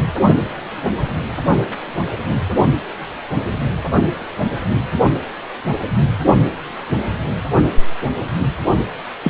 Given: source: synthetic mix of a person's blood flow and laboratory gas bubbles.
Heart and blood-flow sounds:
Doppler ultrasound of blood flow; precordium
9.24-9.30 s: bubbles
From the record:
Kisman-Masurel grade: 113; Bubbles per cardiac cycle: 1 to 2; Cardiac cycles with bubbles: 1 to 10%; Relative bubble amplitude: loud (0.450 to 0.775); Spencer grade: 1 (occasional bubble signal discernible with the cardiac motion signal, with majority of cardiac periods free of bubbles); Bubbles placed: anywhere in the cardiac cycle

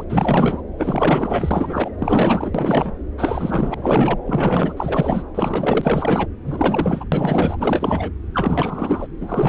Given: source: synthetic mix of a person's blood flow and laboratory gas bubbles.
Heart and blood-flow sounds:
Doppler ultrasound of blood flow; subclavian vein
0.00-0.04 s: bubbles
0.09-0.61 s: bubbles
0.78-1.91 s: bubbles
1.99-2.92 s: bubbles
3.18-4.19 s: bubbles
4.25-4.74 s: bubbles
4.77-5.24 s: bubbles
5.34-6.27 s: bubbles
6.45-7.05 s: bubbles
7.12-8.10 s: bubbles
8.33-9.07 s: bubbles
9.21-9.49 s: bubbles
From the record:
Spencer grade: 4 (maximum detectable bubble signal sounding continuously throughout systole and diastole of every cardiac period, and overriding the amplitude of the normal cardiac signals); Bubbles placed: anywhere in the cardiac cycle

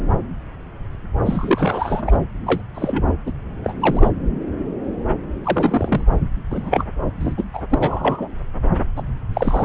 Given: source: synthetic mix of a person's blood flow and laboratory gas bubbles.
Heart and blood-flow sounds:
Doppler ultrasound of blood flow; subclavian vein
1.25-2.17 s: bubbles
2.46-2.62 s: bubbles
2.75-3.04 s: bubbles
3.26-3.31 s: bubbles
3.63-3.73 s: bubbles
3.80-4.11 s: bubbles
5.43-6.05 s: bubbles
6.50-6.84 s: bubbles
7.20-7.34 s: bubbles
7.38-7.43 s: bubbles
7.53-7.62 s: bubbles
7.70-8.29 s: bubbles
8.96-9.03 s: bubbles
9.34-9.65 s: bubbles
From the record:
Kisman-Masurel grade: 233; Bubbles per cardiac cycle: several, 3 to 8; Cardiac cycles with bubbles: 50 to 99%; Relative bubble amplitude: loud (0.450 to 0.775); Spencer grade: 3 (all of the cardiac periods contain showers or single bubble signals, but not dominating or overriding the cardiac motion signals); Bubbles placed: anywhere in the cardiac cycle

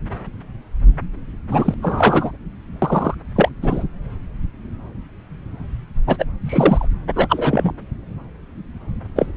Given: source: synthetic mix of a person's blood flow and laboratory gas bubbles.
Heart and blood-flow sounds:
Doppler ultrasound of blood flow; subclavian vein
1.50-1.74 s: bubbles
1.81-2.31 s: bubbles
2.82-3.15 s: bubbles
3.35-3.49 s: bubbles
3.62-3.83 s: bubbles
6.07-6.25 s: bubbles
6.46-6.88 s: bubbles
7.16-7.72 s: bubbles
9.15-9.26 s: bubbles
From the record:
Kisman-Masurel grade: 233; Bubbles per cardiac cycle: several, 3 to 8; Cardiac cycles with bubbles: 50 to 99%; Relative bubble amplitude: loud (0.450 to 0.775); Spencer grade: 3 (all of the cardiac periods contain showers or single bubble signals, but not dominating or overriding the cardiac motion signals); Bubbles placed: anywhere in the cardiac cycle

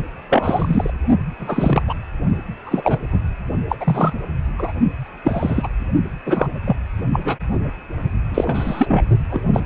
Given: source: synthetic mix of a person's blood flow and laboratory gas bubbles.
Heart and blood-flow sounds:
Doppler ultrasound of blood flow; precordium
0.29-0.93 s: bubbles
1.39-1.82 s: bubbles
1.87-1.94 s: bubbles
2.66-2.98 s: bubbles
3.11-3.20 s: bubbles
3.68-3.76 s: bubbles
3.80-4.14 s: bubbles
4.58-4.73 s: bubbles
5.24-5.68 s: bubbles
6.26-6.48 s: bubbles
6.66-6.76 s: bubbles
7.12-7.20 s: bubbles
7.24-7.37 s: bubbles
8.29-9.03 s: bubbles
9.30-9.43 s: bubbles
9.53-9.60 s: bubbles
From the record:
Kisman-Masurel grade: 243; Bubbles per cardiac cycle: several, 3 to 8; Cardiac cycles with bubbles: 100%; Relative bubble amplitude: loud (0.450 to 0.775); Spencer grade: 3 (all of the cardiac periods contain showers or single bubble signals, but not dominating or overriding the cardiac motion signals); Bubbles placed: only in the low amplitude regions of the cardiac cycle

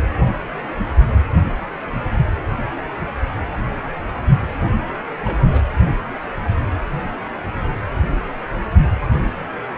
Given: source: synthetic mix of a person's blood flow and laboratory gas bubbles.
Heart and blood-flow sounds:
Doppler ultrasound of blood flow; precordium
4.60-4.69 s: bubbles
5.25-5.62 s: bubbles
From the record:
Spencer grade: 1 (occasional bubble signal discernible with the cardiac motion signal, with majority of cardiac periods free of bubbles); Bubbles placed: anywhere in the cardiac cycle

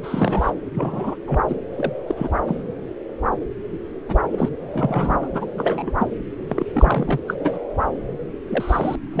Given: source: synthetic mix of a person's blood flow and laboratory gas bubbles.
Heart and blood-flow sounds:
Doppler ultrasound of blood flow; subclavian vein
0.03-0.51 s: bubbles
0.74-1.16 s: bubbles
1.26-1.39 s: bubbles
1.48-1.56 s: bubbles
1.76-1.91 s: bubbles
2.07-2.29 s: bubbles
2.47-2.65 s: bubbles
4.08-4.22 s: bubbles
4.32-4.49 s: bubbles
4.74-5.28 s: bubbles
5.33-5.46 s: bubbles
5.57-5.92 s: bubbles
6.00-6.11 s: bubbles
6.49-6.66 s: bubbles
6.73-7.23 s: bubbles
7.27-7.34 s: bubbles
7.39-7.58 s: bubbles
8.48-8.96 s: bubbles
9.13-9.20 s: bubbles
From the record:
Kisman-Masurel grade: 232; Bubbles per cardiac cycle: several, 3 to 8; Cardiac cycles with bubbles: 50 to 99%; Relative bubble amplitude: moderate (0.250 to 0.450); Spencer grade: 3 (all of the cardiac periods contain showers or single bubble signals, but not dominating or overriding the cardiac motion signals); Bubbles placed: anywhere in the cardiac cycle

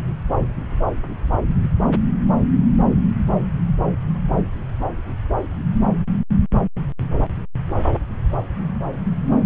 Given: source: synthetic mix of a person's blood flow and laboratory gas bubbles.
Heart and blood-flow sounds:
Doppler ultrasound of blood flow; subclavian vein
no bubbles
From the record:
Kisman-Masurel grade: 000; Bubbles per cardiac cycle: 0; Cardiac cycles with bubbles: 0%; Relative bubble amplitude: no bubbles discernible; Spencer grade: 0 (complete lack of bubble signals)

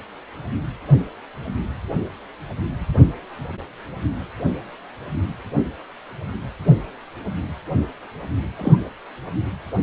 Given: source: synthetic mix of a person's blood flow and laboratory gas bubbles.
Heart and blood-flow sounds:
Doppler ultrasound of blood flow; precordium
8.58-8.78 s: bubbles
From the record:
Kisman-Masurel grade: 112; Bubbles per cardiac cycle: 1 to 2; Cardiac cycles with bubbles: 1 to 10%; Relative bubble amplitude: moderate (0.250 to 0.450); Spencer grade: 1 (occasional bubble signal discernible with the cardiac motion signal, with majority of cardiac periods free of bubbles); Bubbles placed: anywhere in the cardiac cycle

